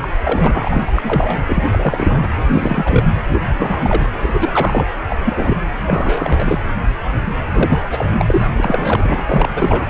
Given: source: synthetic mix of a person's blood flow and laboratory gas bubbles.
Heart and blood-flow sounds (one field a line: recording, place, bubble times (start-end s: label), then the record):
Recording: Doppler ultrasound of blood flow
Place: precordium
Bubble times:
0.02-0.08 s: bubbles
0.23-0.84 s: bubbles
0.86-0.92 s: bubbles
0.96-1.39 s: bubbles
1.48-1.65 s: bubbles
1.71-2.27 s: bubbles
2.50-3.06 s: bubbles
3.29-3.48 s: bubbles
3.56-4.09 s: bubbles
4.19-4.87 s: bubbles
5.07-5.16 s: bubbles
5.25-5.58 s: bubbles
5.87-6.61 s: bubbles
7.53-7.82 s: bubbles
7.90-8.04 s: bubbles
8.18-8.25 s: bubbles
8.28-8.46 s: bubbles
8.56-9.24 s: bubbles
9.27-9.87 s: bubbles
From the record:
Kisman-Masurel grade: 332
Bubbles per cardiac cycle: rolling drumbeat, 9 or more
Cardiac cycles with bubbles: 50 to 99%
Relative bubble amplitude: moderate (0.250 to 0.450)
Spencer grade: 3 (all of the cardiac periods contain showers or single bubble signals, but not dominating or overriding the cardiac motion signals)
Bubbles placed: anywhere in the cardiac cycle